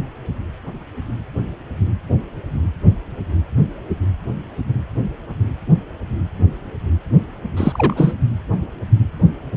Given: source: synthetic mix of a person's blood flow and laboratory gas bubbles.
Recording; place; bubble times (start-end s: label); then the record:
Doppler ultrasound of blood flow; precordium
7.57-8.13 s: bubbles
From the record:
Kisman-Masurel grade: 213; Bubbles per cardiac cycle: several, 3 to 8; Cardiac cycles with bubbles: 1 to 10%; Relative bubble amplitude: loud (0.450 to 0.775); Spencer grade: 1 (occasional bubble signal discernible with the cardiac motion signal, with majority of cardiac periods free of bubbles); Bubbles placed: anywhere in the cardiac cycle